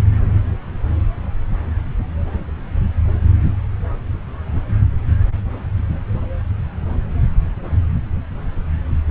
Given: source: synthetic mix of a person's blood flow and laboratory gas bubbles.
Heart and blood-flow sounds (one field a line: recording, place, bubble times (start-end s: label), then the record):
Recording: Doppler ultrasound of blood flow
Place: subclavian vein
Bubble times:
no bubbles
From the record:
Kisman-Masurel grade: 000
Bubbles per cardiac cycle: 0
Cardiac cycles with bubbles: 0%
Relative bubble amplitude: no bubbles discernible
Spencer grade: 0 (complete lack of bubble signals)